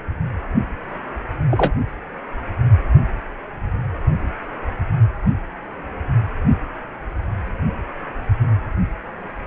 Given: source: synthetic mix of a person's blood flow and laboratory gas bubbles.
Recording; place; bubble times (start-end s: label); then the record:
Doppler ultrasound of blood flow; precordium
1.51-1.72 s: bubbles
From the record:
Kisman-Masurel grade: 113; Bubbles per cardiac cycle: 1 to 2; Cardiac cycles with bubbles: 1 to 10%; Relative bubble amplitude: loud (0.450 to 0.775); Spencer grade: 1 (occasional bubble signal discernible with the cardiac motion signal, with majority of cardiac periods free of bubbles); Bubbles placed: anywhere in the cardiac cycle